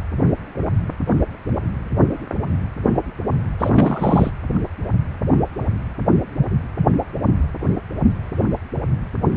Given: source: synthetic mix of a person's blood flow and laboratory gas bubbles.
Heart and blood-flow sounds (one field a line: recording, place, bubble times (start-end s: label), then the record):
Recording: Doppler ultrasound of blood flow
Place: precordium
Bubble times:
3.60-4.30 s: bubbles
From the record:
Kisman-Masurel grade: 212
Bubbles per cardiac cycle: several, 3 to 8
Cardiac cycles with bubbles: 1 to 10%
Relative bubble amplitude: moderate (0.250 to 0.450)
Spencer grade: 1 (occasional bubble signal discernible with the cardiac motion signal, with majority of cardiac periods free of bubbles)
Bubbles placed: anywhere in the cardiac cycle